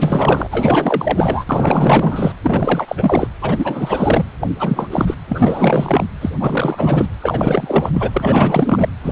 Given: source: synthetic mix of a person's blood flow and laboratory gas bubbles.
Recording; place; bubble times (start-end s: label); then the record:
Doppler ultrasound of blood flow; precordium
0.00-0.48 s: bubbles
0.51-1.45 s: bubbles
1.49-2.32 s: bubbles
2.43-3.28 s: bubbles
3.42-4.25 s: bubbles
4.40-4.48 s: bubbles
4.58-4.88 s: bubbles
4.92-5.15 s: bubbles
5.28-6.05 s: bubbles
6.21-6.30 s: bubbles
6.39-7.06 s: bubbles
7.21-7.90 s: bubbles
7.93-8.10 s: bubbles
8.12-8.89 s: bubbles
9.03-9.12 s: bubbles
From the record:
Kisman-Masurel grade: 444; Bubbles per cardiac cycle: continuous sound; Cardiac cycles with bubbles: 100%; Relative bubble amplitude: maximal (0.775 to 0.999); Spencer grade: 4 (maximum detectable bubble signal sounding continuously throughout systole and diastole of every cardiac period, and overriding the amplitude of the normal cardiac signals); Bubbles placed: anywhere in the cardiac cycle